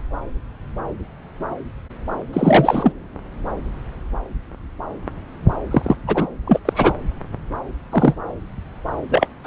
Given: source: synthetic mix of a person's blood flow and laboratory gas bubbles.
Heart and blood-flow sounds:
Doppler ultrasound of blood flow; subclavian vein
2.33-2.93 s: bubbles
5.71-5.96 s: bubbles
6.07-6.28 s: bubbles
6.46-6.60 s: bubbles
6.65-6.93 s: bubbles
7.91-8.14 s: bubbles
9.10-9.27 s: bubbles
9.44-9.47 s: bubbles
From the record:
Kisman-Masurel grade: 223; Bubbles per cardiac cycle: several, 3 to 8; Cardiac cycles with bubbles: 10 to 50%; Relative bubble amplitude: loud (0.450 to 0.775); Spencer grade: 2 (many but less than half of the cardiac periods contain bubble signals, singularly or in groups); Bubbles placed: anywhere in the cardiac cycle

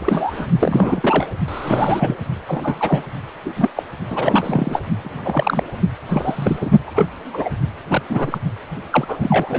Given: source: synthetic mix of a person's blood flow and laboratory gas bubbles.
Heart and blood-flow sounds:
Doppler ultrasound of blood flow; precordium
0.00-0.47 s: bubbles
0.59-1.27 s: bubbles
1.48-2.17 s: bubbles
2.46-3.06 s: bubbles
3.45-3.51 s: bubbles
3.56-3.70 s: bubbles
3.75-3.83 s: bubbles
4.10-4.81 s: bubbles
5.04-5.64 s: bubbles
6.08-6.70 s: bubbles
6.87-7.07 s: bubbles
7.33-7.49 s: bubbles
7.90-8.02 s: bubbles
8.09-8.38 s: bubbles
8.90-9.59 s: bubbles
From the record:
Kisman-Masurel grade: 242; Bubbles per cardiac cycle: several, 3 to 8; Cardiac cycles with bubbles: 100%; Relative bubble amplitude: moderate (0.250 to 0.450); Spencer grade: 3 (all of the cardiac periods contain showers or single bubble signals, but not dominating or overriding the cardiac motion signals); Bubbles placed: only in the low amplitude regions of the cardiac cycle

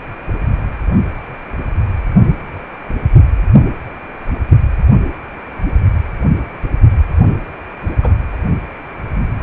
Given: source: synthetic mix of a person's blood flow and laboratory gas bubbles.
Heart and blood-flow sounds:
Doppler ultrasound of blood flow; precordium
8.03-8.13 s: bubbles
From the record:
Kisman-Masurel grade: 112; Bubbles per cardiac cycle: 1 to 2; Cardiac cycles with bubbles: 1 to 10%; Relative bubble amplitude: moderate (0.250 to 0.450); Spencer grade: 1 (occasional bubble signal discernible with the cardiac motion signal, with majority of cardiac periods free of bubbles); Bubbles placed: anywhere in the cardiac cycle

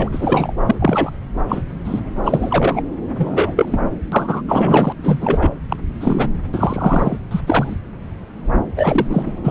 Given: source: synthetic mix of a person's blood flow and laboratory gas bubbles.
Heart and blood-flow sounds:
Doppler ultrasound of blood flow; subclavian vein
0.00-0.09 s: bubbles
0.12-0.53 s: bubbles
0.66-0.76 s: bubbles
0.80-1.11 s: bubbles
1.48-1.62 s: bubbles
1.84-2.02 s: bubbles
2.24-2.81 s: bubbles
3.18-3.53 s: bubbles
3.56-3.81 s: bubbles
4.12-4.42 s: bubbles
4.48-4.93 s: bubbles
5.02-5.52 s: bubbles
5.68-5.76 s: bubbles
6.00-6.28 s: bubbles
6.52-7.17 s: bubbles
7.31-7.41 s: bubbles
7.46-7.75 s: bubbles
8.77-9.23 s: bubbles
9.26-9.32 s: bubbles
9.44-9.51 s: bubbles
From the record:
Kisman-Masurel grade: 233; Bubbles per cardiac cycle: several, 3 to 8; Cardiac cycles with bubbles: 50 to 99%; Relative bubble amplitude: loud (0.450 to 0.775); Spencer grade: 3 (all of the cardiac periods contain showers or single bubble signals, but not dominating or overriding the cardiac motion signals); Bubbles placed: anywhere in the cardiac cycle

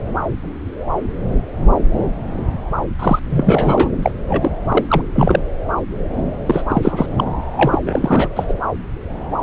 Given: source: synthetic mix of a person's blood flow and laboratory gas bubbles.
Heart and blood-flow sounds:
Doppler ultrasound of blood flow; subclavian vein
2.99-3.19 s: bubbles
3.29-3.89 s: bubbles
4.02-4.12 s: bubbles
4.28-4.51 s: bubbles
4.68-4.85 s: bubbles
4.88-5.02 s: bubbles
5.14-5.39 s: bubbles
6.46-6.62 s: bubbles
6.69-7.06 s: bubbles
7.17-7.24 s: bubbles
7.56-7.79 s: bubbles
7.86-8.28 s: bubbles
8.35-8.54 s: bubbles
From the record:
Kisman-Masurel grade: 333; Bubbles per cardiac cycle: rolling drumbeat, 9 or more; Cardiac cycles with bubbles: 50 to 99%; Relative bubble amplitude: loud (0.450 to 0.775); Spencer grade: 3 (all of the cardiac periods contain showers or single bubble signals, but not dominating or overriding the cardiac motion signals); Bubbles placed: anywhere in the cardiac cycle

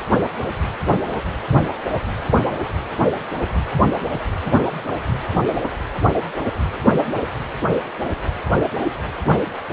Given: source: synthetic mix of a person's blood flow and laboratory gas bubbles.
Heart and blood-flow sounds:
Doppler ultrasound of blood flow; precordium
no bubbles
From the record:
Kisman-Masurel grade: 000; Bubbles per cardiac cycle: 0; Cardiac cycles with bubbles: 0%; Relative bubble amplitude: no bubbles discernible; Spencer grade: 0 (complete lack of bubble signals)

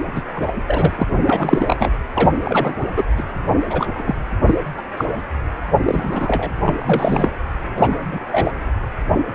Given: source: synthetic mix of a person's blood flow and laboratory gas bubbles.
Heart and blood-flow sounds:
Doppler ultrasound of blood flow; precordium
0.15-0.23 s: bubbles
0.35-0.52 s: bubbles
0.68-0.93 s: bubbles
0.95-1.92 s: bubbles
2.14-2.30 s: bubbles
2.44-2.75 s: bubbles
2.96-3.04 s: bubbles
3.17-3.25 s: bubbles
3.69-4.14 s: bubbles
4.45-4.54 s: bubbles
4.77-4.82 s: bubbles
4.97-5.04 s: bubbles
5.77-6.51 s: bubbles
6.64-7.30 s: bubbles
7.76-7.96 s: bubbles
8.12-8.21 s: bubbles
8.32-8.53 s: bubbles
From the record:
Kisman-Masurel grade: 233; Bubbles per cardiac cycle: several, 3 to 8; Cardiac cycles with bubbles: 50 to 99%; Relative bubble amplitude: loud (0.450 to 0.775); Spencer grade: 3 (all of the cardiac periods contain showers or single bubble signals, but not dominating or overriding the cardiac motion signals); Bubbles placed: anywhere in the cardiac cycle

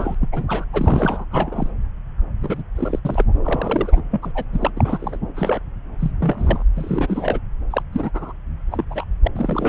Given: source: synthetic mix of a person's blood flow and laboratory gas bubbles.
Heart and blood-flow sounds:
Doppler ultrasound of blood flow; subclavian vein
0.00-0.14 s: bubbles
0.20-0.29 s: bubbles
0.32-0.65 s: bubbles
0.72-1.25 s: bubbles
1.31-1.70 s: bubbles
2.41-2.63 s: bubbles
2.75-2.99 s: bubbles
3.05-3.25 s: bubbles
3.44-4.02 s: bubbles
4.10-4.32 s: bubbles
4.34-4.44 s: bubbles
4.52-4.71 s: bubbles
4.76-5.17 s: bubbles
5.34-5.60 s: bubbles
5.99-6.11 s: bubbles
6.19-6.64 s: bubbles
6.76-7.39 s: bubbles
7.70-7.83 s: bubbles
7.92-8.10 s: bubbles
8.13-8.33 s: bubbles
8.71-8.85 s: bubbles
8.90-9.04 s: bubbles
9.24-9.28 s: bubbles
9.35-9.69 s: bubbles
From the record:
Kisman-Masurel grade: 242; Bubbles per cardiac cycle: several, 3 to 8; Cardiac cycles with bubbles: 100%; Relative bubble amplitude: moderate (0.250 to 0.450); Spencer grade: 3 (all of the cardiac periods contain showers or single bubble signals, but not dominating or overriding the cardiac motion signals); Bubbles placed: anywhere in the cardiac cycle

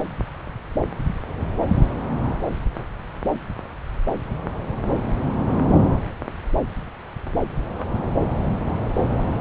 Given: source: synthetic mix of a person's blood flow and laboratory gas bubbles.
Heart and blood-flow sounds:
Doppler ultrasound of blood flow; subclavian vein
no bubbles
From the record:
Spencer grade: 0 (complete lack of bubble signals)

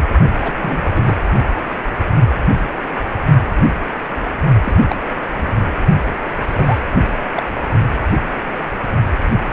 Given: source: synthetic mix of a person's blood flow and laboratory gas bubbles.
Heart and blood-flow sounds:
Doppler ultrasound of blood flow; precordium
0.41-0.53 s: bubbles
0.61-0.90 s: bubbles
0.92-1.16 s: bubbles
4.64-4.80 s: bubbles
4.89-4.96 s: bubbles
5.37-5.57 s: bubbles
6.45-6.79 s: bubbles
7.35-7.43 s: bubbles
From the record:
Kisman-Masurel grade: 222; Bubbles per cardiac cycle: several, 3 to 8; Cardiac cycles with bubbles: 10 to 50%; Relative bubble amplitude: moderate (0.250 to 0.450); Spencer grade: 2 (many but less than half of the cardiac periods contain bubble signals, singularly or in groups); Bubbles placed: only in the low amplitude regions of the cardiac cycle

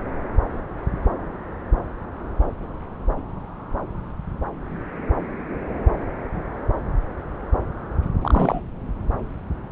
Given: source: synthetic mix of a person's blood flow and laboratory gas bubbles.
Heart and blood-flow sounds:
Doppler ultrasound of blood flow; subclavian vein
8.21-8.61 s: bubbles
From the record:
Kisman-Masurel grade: 212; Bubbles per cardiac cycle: several, 3 to 8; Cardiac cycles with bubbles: 1 to 10%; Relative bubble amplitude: moderate (0.250 to 0.450); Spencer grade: 1 (occasional bubble signal discernible with the cardiac motion signal, with majority of cardiac periods free of bubbles); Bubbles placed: anywhere in the cardiac cycle

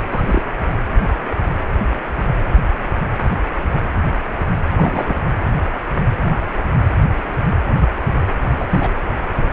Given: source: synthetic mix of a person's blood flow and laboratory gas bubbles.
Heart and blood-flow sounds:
Doppler ultrasound of blood flow; precordium
0.10-0.42 s: bubbles
4.73-5.13 s: bubbles
8.57-8.67 s: bubbles
8.69-8.92 s: bubbles
From the record:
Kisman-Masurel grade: 222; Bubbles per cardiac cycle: several, 3 to 8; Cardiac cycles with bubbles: 10 to 50%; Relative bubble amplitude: moderate (0.250 to 0.450); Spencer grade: 2 (many but less than half of the cardiac periods contain bubble signals, singularly or in groups); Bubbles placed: anywhere in the cardiac cycle

